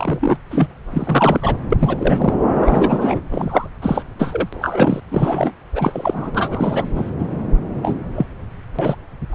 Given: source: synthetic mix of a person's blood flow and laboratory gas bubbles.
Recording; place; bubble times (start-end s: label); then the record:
Doppler ultrasound of blood flow; subclavian vein
0.00-0.37 s: bubbles
0.50-0.66 s: bubbles
0.92-1.57 s: bubbles
1.71-1.77 s: bubbles
1.80-2.34 s: bubbles
2.54-3.21 s: bubbles
3.31-3.68 s: bubbles
3.81-4.04 s: bubbles
4.19-4.49 s: bubbles
4.53-5.00 s: bubbles
5.11-5.51 s: bubbles
5.75-6.31 s: bubbles
6.34-6.87 s: bubbles
6.95-7.11 s: bubbles
7.18-7.28 s: bubbles
7.83-7.99 s: bubbles
8.16-8.26 s: bubbles
8.79-8.96 s: bubbles
9.31-9.35 s: bubbles
From the record:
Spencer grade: 3 (all of the cardiac periods contain showers or single bubble signals, but not dominating or overriding the cardiac motion signals); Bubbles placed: anywhere in the cardiac cycle